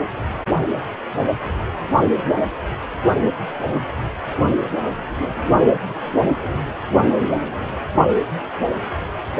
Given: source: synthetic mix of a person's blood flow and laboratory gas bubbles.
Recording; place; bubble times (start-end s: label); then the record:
Doppler ultrasound of blood flow; precordium
no bubbles
From the record:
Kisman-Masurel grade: 000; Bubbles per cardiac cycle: 0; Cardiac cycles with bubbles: 0%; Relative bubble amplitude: no bubbles discernible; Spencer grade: 0 (complete lack of bubble signals)